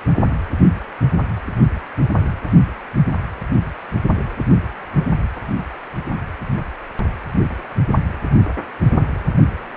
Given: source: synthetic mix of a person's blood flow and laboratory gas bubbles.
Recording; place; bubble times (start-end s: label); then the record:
Doppler ultrasound of blood flow; precordium
no bubbles
From the record:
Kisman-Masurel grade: 000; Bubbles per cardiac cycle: 0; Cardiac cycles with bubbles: 0%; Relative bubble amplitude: no bubbles discernible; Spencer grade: 0 (complete lack of bubble signals)